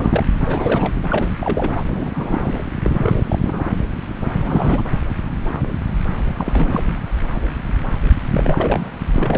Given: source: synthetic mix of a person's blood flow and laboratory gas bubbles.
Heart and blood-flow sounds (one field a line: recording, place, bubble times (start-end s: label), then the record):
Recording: Doppler ultrasound of blood flow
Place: subclavian vein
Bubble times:
0.00-0.23 s: bubbles
0.46-0.94 s: bubbles
1.10-1.27 s: bubbles
1.41-1.82 s: bubbles
1.88-2.62 s: bubbles
2.81-3.23 s: bubbles
3.29-3.38 s: bubbles
3.42-3.70 s: bubbles
4.32-4.82 s: bubbles
6.37-6.83 s: bubbles
8.32-8.88 s: bubbles
9.13-9.38 s: bubbles
From the record:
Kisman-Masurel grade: 332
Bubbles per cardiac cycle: rolling drumbeat, 9 or more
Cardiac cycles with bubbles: 50 to 99%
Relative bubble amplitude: moderate (0.250 to 0.450)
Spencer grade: 3 (all of the cardiac periods contain showers or single bubble signals, but not dominating or overriding the cardiac motion signals)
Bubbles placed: anywhere in the cardiac cycle